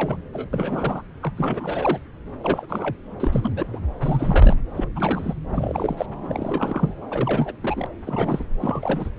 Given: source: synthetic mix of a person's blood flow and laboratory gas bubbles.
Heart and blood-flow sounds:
Doppler ultrasound of blood flow; subclavian vein
0.00-0.17 s: bubbles
0.33-0.47 s: bubbles
0.53-1.02 s: bubbles
1.23-1.33 s: bubbles
1.37-1.98 s: bubbles
2.40-2.97 s: bubbles
3.20-3.52 s: bubbles
3.56-3.67 s: bubbles
3.73-3.79 s: bubbles
4.00-4.56 s: bubbles
4.76-4.88 s: bubbles
4.96-5.33 s: bubbles
5.49-6.06 s: bubbles
6.23-6.92 s: bubbles
7.11-7.53 s: bubbles
7.63-7.86 s: bubbles
8.04-8.44 s: bubbles
8.59-9.09 s: bubbles
From the record:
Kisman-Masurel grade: 342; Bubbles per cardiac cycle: rolling drumbeat, 9 or more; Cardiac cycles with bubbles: 100%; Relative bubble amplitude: moderate (0.250 to 0.450); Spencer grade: 3 (all of the cardiac periods contain showers or single bubble signals, but not dominating or overriding the cardiac motion signals); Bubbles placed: anywhere in the cardiac cycle

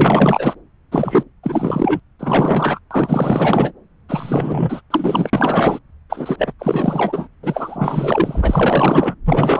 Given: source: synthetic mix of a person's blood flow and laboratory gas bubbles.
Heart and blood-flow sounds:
Doppler ultrasound of blood flow; subclavian vein
0.00-0.55 s: bubbles
0.91-1.23 s: bubbles
1.43-2.00 s: bubbles
2.19-2.79 s: bubbles
2.91-3.73 s: bubbles
4.08-4.81 s: bubbles
4.90-5.30 s: bubbles
5.33-5.79 s: bubbles
6.09-6.52 s: bubbles
6.59-7.27 s: bubbles
7.43-8.39 s: bubbles
8.41-9.14 s: bubbles
9.26-9.60 s: bubbles
From the record:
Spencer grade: 4 (maximum detectable bubble signal sounding continuously throughout systole and diastole of every cardiac period, and overriding the amplitude of the normal cardiac signals); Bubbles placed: anywhere in the cardiac cycle

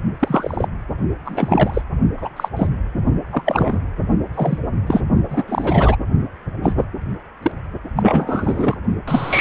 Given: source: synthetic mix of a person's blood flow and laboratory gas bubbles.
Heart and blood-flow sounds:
Doppler ultrasound of blood flow; precordium
0.19-0.67 s: bubbles
1.25-1.81 s: bubbles
2.17-2.28 s: bubbles
2.36-2.48 s: bubbles
2.56-2.67 s: bubbles
3.32-3.42 s: bubbles
3.46-3.78 s: bubbles
4.34-4.58 s: bubbles
4.87-5.00 s: bubbles
5.29-5.43 s: bubbles
5.48-5.96 s: bubbles
6.62-6.73 s: bubbles
6.77-6.84 s: bubbles
7.42-7.52 s: bubbles
7.96-8.75 s: bubbles
9.08-9.41 s: bubbles
From the record:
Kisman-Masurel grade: 243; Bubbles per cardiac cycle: several, 3 to 8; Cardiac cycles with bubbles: 100%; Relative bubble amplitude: loud (0.450 to 0.775); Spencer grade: 3 (all of the cardiac periods contain showers or single bubble signals, but not dominating or overriding the cardiac motion signals); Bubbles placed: only in the low amplitude regions of the cardiac cycle

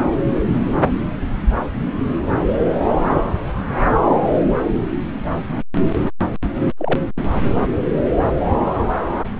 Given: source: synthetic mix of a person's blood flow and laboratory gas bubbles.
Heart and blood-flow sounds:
Doppler ultrasound of blood flow; subclavian vein
6.77-7.00 s: bubbles
From the record:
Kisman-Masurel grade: 122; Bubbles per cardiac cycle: 1 to 2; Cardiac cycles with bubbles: 10 to 50%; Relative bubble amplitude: moderate (0.250 to 0.450); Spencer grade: 2 (many but less than half of the cardiac periods contain bubble signals, singularly or in groups); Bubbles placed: anywhere in the cardiac cycle

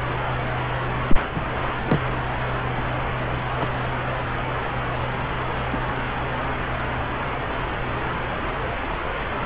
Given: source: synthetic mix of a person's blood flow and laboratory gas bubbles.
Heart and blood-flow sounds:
Doppler ultrasound of blood flow; subclavian vein
1.07-1.17 s: bubbles
1.34-1.42 s: bubbles
1.88-2.00 s: bubbles
3.60-3.69 s: bubbles
5.69-5.79 s: bubbles
From the record:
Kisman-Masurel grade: 122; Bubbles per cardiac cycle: 1 to 2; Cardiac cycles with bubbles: 10 to 50%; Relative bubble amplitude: moderate (0.250 to 0.450); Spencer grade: 2 (many but less than half of the cardiac periods contain bubble signals, singularly or in groups); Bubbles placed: anywhere in the cardiac cycle

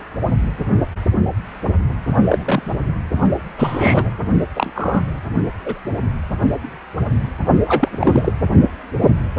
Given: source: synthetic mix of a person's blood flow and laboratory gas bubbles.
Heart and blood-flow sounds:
Doppler ultrasound of blood flow; precordium
2.29-2.83 s: bubbles
3.58-4.11 s: bubbles
4.55-4.70 s: bubbles
4.75-5.05 s: bubbles
5.65-5.79 s: bubbles
7.67-8.32 s: bubbles
9.02-9.09 s: bubbles
From the record:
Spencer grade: 3 (all of the cardiac periods contain showers or single bubble signals, but not dominating or overriding the cardiac motion signals); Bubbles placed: only in the low amplitude regions of the cardiac cycle

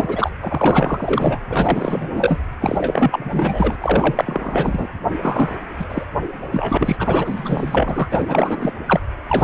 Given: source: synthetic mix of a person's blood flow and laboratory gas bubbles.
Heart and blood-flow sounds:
Doppler ultrasound of blood flow; precordium
0.00-0.30 s: bubbles
0.43-1.39 s: bubbles
1.49-2.39 s: bubbles
2.61-3.77 s: bubbles
3.81-4.87 s: bubbles
5.21-5.55 s: bubbles
5.78-5.85 s: bubbles
5.88-6.04 s: bubbles
6.51-8.09 s: bubbles
8.11-8.74 s: bubbles
8.86-9.00 s: bubbles
9.29-9.44 s: bubbles
From the record:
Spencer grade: 4 (maximum detectable bubble signal sounding continuously throughout systole and diastole of every cardiac period, and overriding the amplitude of the normal cardiac signals); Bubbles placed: anywhere in the cardiac cycle

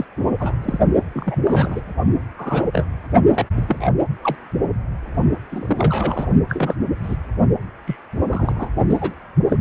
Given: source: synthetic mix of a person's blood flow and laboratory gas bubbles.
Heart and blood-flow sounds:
Doppler ultrasound of blood flow; precordium
0.00-0.05 s: bubbles
0.40-0.55 s: bubbles
0.62-0.79 s: bubbles
1.14-1.36 s: bubbles
1.46-1.81 s: bubbles
2.38-2.65 s: bubbles
2.72-2.86 s: bubbles
3.29-3.44 s: bubbles
3.56-3.61 s: bubbles
3.69-3.88 s: bubbles
4.21-4.35 s: bubbles
5.49-6.27 s: bubbles
6.49-6.75 s: bubbles
7.04-7.17 s: bubbles
7.86-7.97 s: bubbles
8.30-8.69 s: bubbles
8.88-9.14 s: bubbles
9.48-9.57 s: bubbles
From the record:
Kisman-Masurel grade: 242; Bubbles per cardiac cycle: several, 3 to 8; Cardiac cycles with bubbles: 100%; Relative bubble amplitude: moderate (0.250 to 0.450); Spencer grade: 3 (all of the cardiac periods contain showers or single bubble signals, but not dominating or overriding the cardiac motion signals); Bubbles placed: only in the low amplitude regions of the cardiac cycle

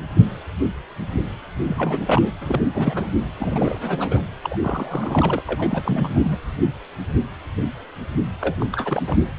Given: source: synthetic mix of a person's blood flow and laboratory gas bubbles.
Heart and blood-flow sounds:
Doppler ultrasound of blood flow; precordium
1.60-2.31 s: bubbles
2.41-2.69 s: bubbles
2.74-3.30 s: bubbles
3.40-4.27 s: bubbles
4.43-4.58 s: bubbles
4.62-5.43 s: bubbles
5.47-6.39 s: bubbles
8.41-8.56 s: bubbles
8.60-8.66 s: bubbles
8.72-9.03 s: bubbles
9.07-9.26 s: bubbles
From the record:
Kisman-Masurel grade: 332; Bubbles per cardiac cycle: rolling drumbeat, 9 or more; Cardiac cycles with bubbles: 50 to 99%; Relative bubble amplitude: moderate (0.250 to 0.450); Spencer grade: 3 (all of the cardiac periods contain showers or single bubble signals, but not dominating or overriding the cardiac motion signals); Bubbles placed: anywhere in the cardiac cycle

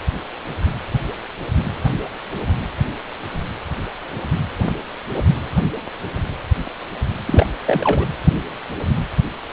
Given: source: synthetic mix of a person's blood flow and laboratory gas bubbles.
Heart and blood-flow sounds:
Doppler ultrasound of blood flow; precordium
7.26-7.46 s: bubbles
7.66-8.07 s: bubbles
From the record:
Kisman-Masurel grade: 213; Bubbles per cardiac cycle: several, 3 to 8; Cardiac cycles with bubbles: 1 to 10%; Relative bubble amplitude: loud (0.450 to 0.775); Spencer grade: 1 (occasional bubble signal discernible with the cardiac motion signal, with majority of cardiac periods free of bubbles); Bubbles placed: anywhere in the cardiac cycle

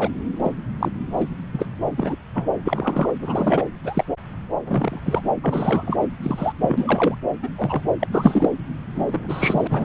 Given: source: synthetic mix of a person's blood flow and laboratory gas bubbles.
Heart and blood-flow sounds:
Doppler ultrasound of blood flow; subclavian vein
0.00-0.10 s: bubbles
0.43-0.53 s: bubbles
0.79-0.91 s: bubbles
1.17-1.27 s: bubbles
1.51-1.67 s: bubbles
1.97-2.16 s: bubbles
2.34-2.50 s: bubbles
2.65-3.11 s: bubbles
3.21-3.63 s: bubbles
3.84-4.04 s: bubbles
4.55-5.00 s: bubbles
5.05-5.21 s: bubbles
5.41-5.99 s: bubbles
6.22-6.53 s: bubbles
6.60-7.19 s: bubbles
7.42-7.50 s: bubbles
7.56-7.82 s: bubbles
7.99-8.08 s: bubbles
8.12-8.50 s: bubbles
8.94-9.85 s: bubbles
From the record:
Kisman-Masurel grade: 243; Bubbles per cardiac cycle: several, 3 to 8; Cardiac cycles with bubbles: 100%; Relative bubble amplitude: loud (0.450 to 0.775); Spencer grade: 3 (all of the cardiac periods contain showers or single bubble signals, but not dominating or overriding the cardiac motion signals); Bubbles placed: anywhere in the cardiac cycle

